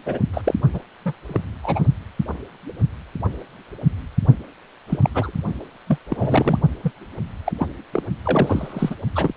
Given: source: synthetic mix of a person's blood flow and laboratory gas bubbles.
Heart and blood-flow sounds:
Doppler ultrasound of blood flow; precordium
0.05-0.18 s: bubbles
0.33-0.54 s: bubbles
0.73-0.79 s: bubbles
1.05-1.13 s: bubbles
1.28-1.41 s: bubbles
1.63-1.80 s: bubbles
4.89-4.99 s: bubbles
5.02-5.09 s: bubbles
5.14-5.31 s: bubbles
5.44-5.53 s: bubbles
5.87-5.98 s: bubbles
6.09-6.58 s: bubbles
6.83-6.92 s: bubbles
7.46-7.52 s: bubbles
7.59-7.67 s: bubbles
7.93-8.03 s: bubbles
8.24-8.96 s: bubbles
9.15-9.34 s: bubbles
From the record:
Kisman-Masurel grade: 232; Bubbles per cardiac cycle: several, 3 to 8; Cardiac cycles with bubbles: 50 to 99%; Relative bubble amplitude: moderate (0.250 to 0.450); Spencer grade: 3 (all of the cardiac periods contain showers or single bubble signals, but not dominating or overriding the cardiac motion signals); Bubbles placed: only in the low amplitude regions of the cardiac cycle

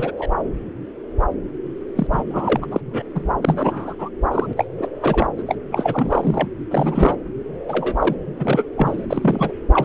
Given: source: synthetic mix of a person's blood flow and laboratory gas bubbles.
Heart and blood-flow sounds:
Doppler ultrasound of blood flow; subclavian vein
0.00-0.12 s: bubbles
0.17-0.28 s: bubbles
1.95-2.07 s: bubbles
2.12-2.24 s: bubbles
2.30-2.66 s: bubbles
2.71-2.81 s: bubbles
2.86-3.03 s: bubbles
3.15-3.31 s: bubbles
3.42-3.96 s: bubbles
3.99-4.09 s: bubbles
4.32-4.54 s: bubbles
4.57-4.66 s: bubbles
4.78-4.89 s: bubbles
5.00-5.27 s: bubbles
5.38-5.44 s: bubbles
5.47-5.55 s: bubbles
5.71-6.50 s: bubbles
6.71-7.17 s: bubbles
7.68-7.95 s: bubbles
8.00-8.15 s: bubbles
8.36-8.64 s: bubbles
8.77-9.05 s: bubbles
9.10-9.53 s: bubbles
9.72-9.85 s: bubbles
From the record:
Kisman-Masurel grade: 332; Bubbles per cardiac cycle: rolling drumbeat, 9 or more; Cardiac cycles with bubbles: 50 to 99%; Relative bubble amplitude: moderate (0.250 to 0.450); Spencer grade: 3 (all of the cardiac periods contain showers or single bubble signals, but not dominating or overriding the cardiac motion signals); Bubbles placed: anywhere in the cardiac cycle

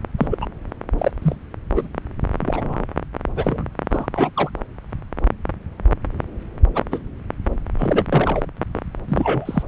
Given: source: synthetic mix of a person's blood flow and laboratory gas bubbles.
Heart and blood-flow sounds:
Doppler ultrasound of blood flow; subclavian vein
0.18-0.27 s: bubbles
0.30-0.38 s: bubbles
0.41-0.46 s: bubbles
0.98-1.11 s: bubbles
1.22-1.35 s: bubbles
1.75-1.88 s: bubbles
2.39-2.86 s: bubbles
3.36-3.67 s: bubbles
3.91-4.07 s: bubbles
4.13-4.30 s: bubbles
4.36-4.50 s: bubbles
6.74-6.83 s: bubbles
6.91-6.99 s: bubbles
7.78-8.05 s: bubbles
8.12-8.46 s: bubbles
8.75-8.80 s: bubbles
9.08-9.63 s: bubbles
From the record:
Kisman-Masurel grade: 232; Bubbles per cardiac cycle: several, 3 to 8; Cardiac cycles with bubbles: 50 to 99%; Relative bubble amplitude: moderate (0.250 to 0.450); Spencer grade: 3 (all of the cardiac periods contain showers or single bubble signals, but not dominating or overriding the cardiac motion signals); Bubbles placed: anywhere in the cardiac cycle

